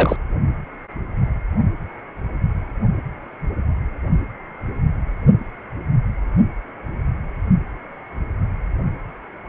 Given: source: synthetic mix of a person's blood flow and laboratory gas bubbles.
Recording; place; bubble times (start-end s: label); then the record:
Doppler ultrasound of blood flow; precordium
0.00-0.16 s: bubbles
From the record:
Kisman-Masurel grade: 222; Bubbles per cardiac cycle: several, 3 to 8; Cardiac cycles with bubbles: 10 to 50%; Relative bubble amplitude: moderate (0.250 to 0.450); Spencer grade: 2 (many but less than half of the cardiac periods contain bubble signals, singularly or in groups); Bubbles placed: only in the low amplitude regions of the cardiac cycle